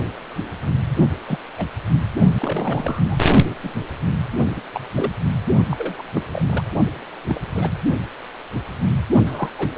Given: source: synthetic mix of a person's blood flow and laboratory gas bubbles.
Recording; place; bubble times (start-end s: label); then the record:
Doppler ultrasound of blood flow; precordium
1.27-1.39 s: bubbles
1.57-1.66 s: bubbles
2.40-3.19 s: bubbles
3.62-3.73 s: bubbles
4.32-4.42 s: bubbles
4.44-4.61 s: bubbles
4.73-4.85 s: bubbles
4.95-5.12 s: bubbles
5.69-5.94 s: bubbles
5.97-6.02 s: bubbles
6.14-6.23 s: bubbles
6.32-6.63 s: bubbles
7.28-7.40 s: bubbles
7.55-7.69 s: bubbles
9.26-9.50 s: bubbles
9.58-9.71 s: bubbles
9.76-9.78 s: bubbles
From the record:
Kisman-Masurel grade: 232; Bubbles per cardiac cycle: several, 3 to 8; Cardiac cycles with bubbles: 50 to 99%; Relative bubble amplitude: moderate (0.250 to 0.450); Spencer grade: 3 (all of the cardiac periods contain showers or single bubble signals, but not dominating or overriding the cardiac motion signals); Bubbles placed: only in the low amplitude regions of the cardiac cycle